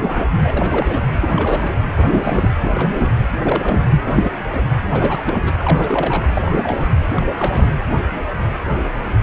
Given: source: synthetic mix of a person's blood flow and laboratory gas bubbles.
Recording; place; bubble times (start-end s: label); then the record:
Doppler ultrasound of blood flow; precordium
0.00-0.25 s: bubbles
0.43-1.07 s: bubbles
1.18-1.71 s: bubbles
1.96-2.50 s: bubbles
2.62-3.14 s: bubbles
3.42-3.84 s: bubbles
4.04-4.31 s: bubbles
4.53-4.61 s: bubbles
4.92-5.51 s: bubbles
5.57-6.27 s: bubbles
6.33-6.88 s: bubbles
7.17-7.31 s: bubbles
7.37-7.70 s: bubbles
9.21-9.23 s: bubbles
From the record:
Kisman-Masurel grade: 332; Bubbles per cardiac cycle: rolling drumbeat, 9 or more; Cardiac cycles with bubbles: 50 to 99%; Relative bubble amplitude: moderate (0.250 to 0.450); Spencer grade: 3 (all of the cardiac periods contain showers or single bubble signals, but not dominating or overriding the cardiac motion signals); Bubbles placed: anywhere in the cardiac cycle